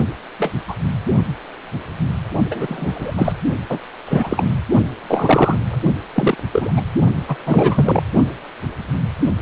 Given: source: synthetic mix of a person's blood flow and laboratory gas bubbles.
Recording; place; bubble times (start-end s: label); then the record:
Doppler ultrasound of blood flow; precordium
0.00-0.05 s: bubbles
0.39-0.51 s: bubbles
0.67-0.75 s: bubbles
2.50-3.15 s: bubbles
3.17-3.32 s: bubbles
3.69-3.78 s: bubbles
4.05-4.57 s: bubbles
5.08-5.80 s: bubbles
6.15-6.38 s: bubbles
6.52-6.74 s: bubbles
6.76-6.82 s: bubbles
7.28-7.36 s: bubbles
7.46-8.02 s: bubbles
From the record:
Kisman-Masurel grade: 233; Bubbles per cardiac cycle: several, 3 to 8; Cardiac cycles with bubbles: 50 to 99%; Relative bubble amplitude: loud (0.450 to 0.775); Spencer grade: 3 (all of the cardiac periods contain showers or single bubble signals, but not dominating or overriding the cardiac motion signals); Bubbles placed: only in the low amplitude regions of the cardiac cycle